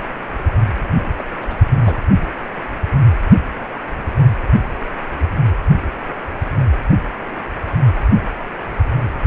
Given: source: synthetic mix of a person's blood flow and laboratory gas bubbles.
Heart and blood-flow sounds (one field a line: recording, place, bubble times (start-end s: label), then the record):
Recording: Doppler ultrasound of blood flow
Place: precordium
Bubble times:
1.19-1.24 s: bubbles
1.41-1.55 s: bubbles
1.84-1.98 s: bubbles
From the record:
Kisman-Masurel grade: 211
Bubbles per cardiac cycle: several, 3 to 8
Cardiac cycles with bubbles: 1 to 10%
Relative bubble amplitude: barely perceptible (0.100 to 0.250)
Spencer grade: 1 (occasional bubble signal discernible with the cardiac motion signal, with majority of cardiac periods free of bubbles)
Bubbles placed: anywhere in the cardiac cycle